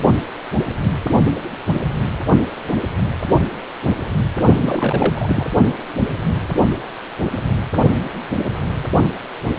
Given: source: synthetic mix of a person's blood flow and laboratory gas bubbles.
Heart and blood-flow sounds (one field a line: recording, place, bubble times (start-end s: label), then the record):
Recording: Doppler ultrasound of blood flow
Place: precordium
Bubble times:
4.56-5.45 s: bubbles
From the record:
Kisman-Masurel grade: 222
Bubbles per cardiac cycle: several, 3 to 8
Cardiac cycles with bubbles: 10 to 50%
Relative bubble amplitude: moderate (0.250 to 0.450)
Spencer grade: 2 (many but less than half of the cardiac periods contain bubble signals, singularly or in groups)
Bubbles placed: only in the low amplitude regions of the cardiac cycle